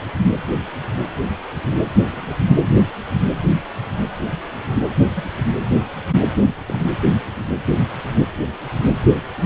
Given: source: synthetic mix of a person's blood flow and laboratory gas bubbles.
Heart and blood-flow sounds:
Doppler ultrasound of blood flow; precordium
2.12-2.35 s: bubbles
5.16-5.24 s: bubbles
6.67-6.76 s: bubbles
From the record:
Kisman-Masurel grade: 121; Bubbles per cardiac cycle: 1 to 2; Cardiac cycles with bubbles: 10 to 50%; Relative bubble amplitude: barely perceptible (0.100 to 0.250); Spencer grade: 2 (many but less than half of the cardiac periods contain bubble signals, singularly or in groups); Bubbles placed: anywhere in the cardiac cycle

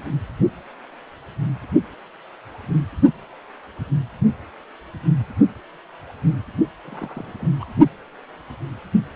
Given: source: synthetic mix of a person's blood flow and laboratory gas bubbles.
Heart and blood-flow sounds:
Doppler ultrasound of blood flow; precordium
6.85-7.55 s: bubbles
7.60-7.72 s: bubbles
From the record:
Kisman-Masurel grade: 211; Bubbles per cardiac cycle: several, 3 to 8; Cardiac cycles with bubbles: 1 to 10%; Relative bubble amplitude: barely perceptible (0.100 to 0.250); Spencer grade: 1 (occasional bubble signal discernible with the cardiac motion signal, with majority of cardiac periods free of bubbles); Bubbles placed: only in the low amplitude regions of the cardiac cycle

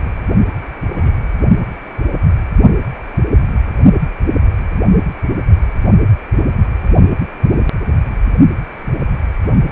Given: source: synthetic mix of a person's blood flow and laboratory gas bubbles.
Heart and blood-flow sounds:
Doppler ultrasound of blood flow; precordium
0.91-1.15 s: bubbles
8.82-8.92 s: bubbles
From the record:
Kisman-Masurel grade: 121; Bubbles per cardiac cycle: 1 to 2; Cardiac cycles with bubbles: 10 to 50%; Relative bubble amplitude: barely perceptible (0.100 to 0.250); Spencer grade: 2 (many but less than half of the cardiac periods contain bubble signals, singularly or in groups); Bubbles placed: only in the low amplitude regions of the cardiac cycle

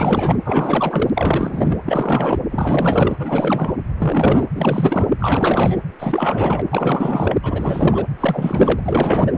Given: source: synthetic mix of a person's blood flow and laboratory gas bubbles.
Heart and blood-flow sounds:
Doppler ultrasound of blood flow; precordium
0.00-0.37 s: bubbles
0.44-1.10 s: bubbles
1.15-1.78 s: bubbles
1.86-2.39 s: bubbles
2.51-3.16 s: bubbles
3.19-3.73 s: bubbles
3.97-4.46 s: bubbles
4.54-5.07 s: bubbles
5.20-5.77 s: bubbles
5.99-6.63 s: bubbles
6.70-7.36 s: bubbles
7.42-8.07 s: bubbles
8.18-9.33 s: bubbles
From the record:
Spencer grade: 4 (maximum detectable bubble signal sounding continuously throughout systole and diastole of every cardiac period, and overriding the amplitude of the normal cardiac signals); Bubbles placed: anywhere in the cardiac cycle

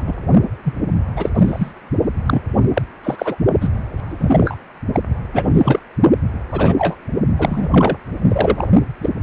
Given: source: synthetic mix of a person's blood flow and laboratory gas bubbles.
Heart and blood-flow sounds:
Doppler ultrasound of blood flow; precordium
0.00-0.03 s: bubbles
0.07-0.15 s: bubbles
0.64-0.74 s: bubbles
1.16-1.31 s: bubbles
1.34-1.72 s: bubbles
2.26-2.42 s: bubbles
2.74-2.82 s: bubbles
3.03-3.37 s: bubbles
3.60-3.69 s: bubbles
4.06-4.55 s: bubbles
4.94-5.00 s: bubbles
5.33-5.79 s: bubbles
6.51-6.75 s: bubbles
6.78-6.96 s: bubbles
7.38-7.69 s: bubbles
7.71-7.97 s: bubbles
8.28-8.68 s: bubbles
9.02-9.10 s: bubbles
From the record:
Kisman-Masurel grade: 233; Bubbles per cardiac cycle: several, 3 to 8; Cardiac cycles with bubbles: 50 to 99%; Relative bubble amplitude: loud (0.450 to 0.775); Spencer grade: 3 (all of the cardiac periods contain showers or single bubble signals, but not dominating or overriding the cardiac motion signals); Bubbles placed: only in the low amplitude regions of the cardiac cycle

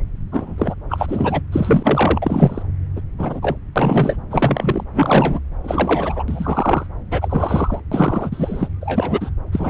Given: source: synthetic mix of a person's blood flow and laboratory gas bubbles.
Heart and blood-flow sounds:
Doppler ultrasound of blood flow; subclavian vein
0.32-0.56 s: bubbles
0.58-0.74 s: bubbles
0.90-1.42 s: bubbles
1.52-2.63 s: bubbles
2.96-3.00 s: bubbles
3.18-3.56 s: bubbles
3.75-4.16 s: bubbles
4.29-4.84 s: bubbles
4.94-5.39 s: bubbles
5.63-6.23 s: bubbles
6.28-6.86 s: bubbles
7.11-7.80 s: bubbles
7.91-8.68 s: bubbles
8.81-9.30 s: bubbles
9.52-9.70 s: bubbles
From the record:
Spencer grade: 3 (all of the cardiac periods contain showers or single bubble signals, but not dominating or overriding the cardiac motion signals); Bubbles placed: anywhere in the cardiac cycle

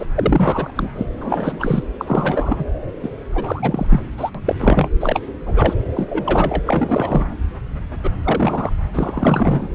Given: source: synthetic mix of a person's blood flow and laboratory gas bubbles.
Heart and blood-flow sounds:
Doppler ultrasound of blood flow; subclavian vein
0.00-0.06 s: bubbles
0.14-0.70 s: bubbles
0.75-0.90 s: bubbles
0.96-1.06 s: bubbles
1.12-1.83 s: bubbles
2.00-2.65 s: bubbles
3.03-3.10 s: bubbles
3.35-4.00 s: bubbles
4.17-4.30 s: bubbles
4.35-4.41 s: bubbles
4.45-4.56 s: bubbles
4.60-4.88 s: bubbles
5.00-5.20 s: bubbles
5.46-5.75 s: bubbles
5.93-6.62 s: bubbles
6.66-7.35 s: bubbles
8.04-8.11 s: bubbles
8.23-8.72 s: bubbles
8.94-9.68 s: bubbles
From the record:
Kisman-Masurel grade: 342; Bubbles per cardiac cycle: rolling drumbeat, 9 or more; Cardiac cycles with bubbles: 100%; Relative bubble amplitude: moderate (0.250 to 0.450); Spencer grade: 3 (all of the cardiac periods contain showers or single bubble signals, but not dominating or overriding the cardiac motion signals); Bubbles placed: anywhere in the cardiac cycle

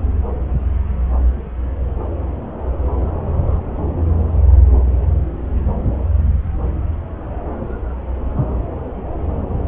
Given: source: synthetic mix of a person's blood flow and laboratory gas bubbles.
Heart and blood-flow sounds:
Doppler ultrasound of blood flow; subclavian vein
no bubbles
From the record:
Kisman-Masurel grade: 000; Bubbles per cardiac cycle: 0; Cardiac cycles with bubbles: 0%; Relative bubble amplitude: no bubbles discernible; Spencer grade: 0 (complete lack of bubble signals)

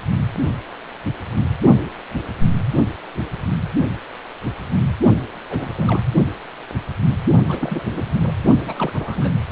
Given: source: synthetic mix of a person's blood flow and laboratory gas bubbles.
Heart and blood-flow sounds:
Doppler ultrasound of blood flow; precordium
5.50-5.69 s: bubbles
5.75-6.04 s: bubbles
7.48-7.83 s: bubbles
7.92-8.06 s: bubbles
8.19-8.34 s: bubbles
8.63-9.30 s: bubbles
From the record:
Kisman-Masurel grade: 221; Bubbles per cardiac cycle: several, 3 to 8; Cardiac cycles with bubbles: 10 to 50%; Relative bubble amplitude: barely perceptible (0.100 to 0.250); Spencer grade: 2 (many but less than half of the cardiac periods contain bubble signals, singularly or in groups); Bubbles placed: only in the low amplitude regions of the cardiac cycle

